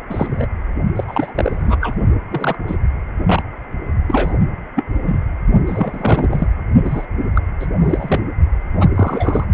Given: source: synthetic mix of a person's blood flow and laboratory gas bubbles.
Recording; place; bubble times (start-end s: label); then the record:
Doppler ultrasound of blood flow; precordium
0.10-0.47 s: bubbles
0.95-1.04 s: bubbles
1.07-1.31 s: bubbles
1.34-1.76 s: bubbles
1.81-1.95 s: bubbles
2.30-2.56 s: bubbles
2.67-2.76 s: bubbles
3.26-3.43 s: bubbles
4.07-4.36 s: bubbles
4.76-4.84 s: bubbles
5.06-5.20 s: bubbles
5.67-6.48 s: bubbles
6.84-7.07 s: bubbles
7.34-7.44 s: bubbles
7.59-7.66 s: bubbles
7.79-8.21 s: bubbles
8.80-8.88 s: bubbles
8.94-9.44 s: bubbles
From the record:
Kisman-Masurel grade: 242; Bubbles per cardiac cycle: several, 3 to 8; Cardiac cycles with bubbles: 100%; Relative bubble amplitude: moderate (0.250 to 0.450); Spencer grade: 3 (all of the cardiac periods contain showers or single bubble signals, but not dominating or overriding the cardiac motion signals); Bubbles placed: only in the low amplitude regions of the cardiac cycle